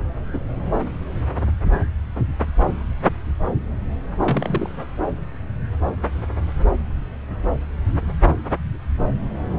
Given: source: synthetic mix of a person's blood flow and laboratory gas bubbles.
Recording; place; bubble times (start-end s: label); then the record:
Doppler ultrasound of blood flow; subclavian vein
0.33-0.41 s: bubbles
4.18-4.70 s: bubbles
From the record:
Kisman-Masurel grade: 122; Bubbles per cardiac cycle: 1 to 2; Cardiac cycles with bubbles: 10 to 50%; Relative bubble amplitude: moderate (0.250 to 0.450); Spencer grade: 2 (many but less than half of the cardiac periods contain bubble signals, singularly or in groups); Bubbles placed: anywhere in the cardiac cycle